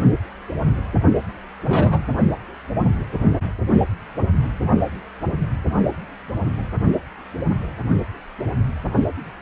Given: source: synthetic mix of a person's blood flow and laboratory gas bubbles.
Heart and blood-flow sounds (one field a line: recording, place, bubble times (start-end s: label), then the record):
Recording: Doppler ultrasound of blood flow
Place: precordium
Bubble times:
1.67-2.04 s: bubbles
From the record:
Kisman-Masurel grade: 113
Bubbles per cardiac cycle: 1 to 2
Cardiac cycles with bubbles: 1 to 10%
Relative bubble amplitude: loud (0.450 to 0.775)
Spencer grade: 1 (occasional bubble signal discernible with the cardiac motion signal, with majority of cardiac periods free of bubbles)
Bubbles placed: only in the low amplitude regions of the cardiac cycle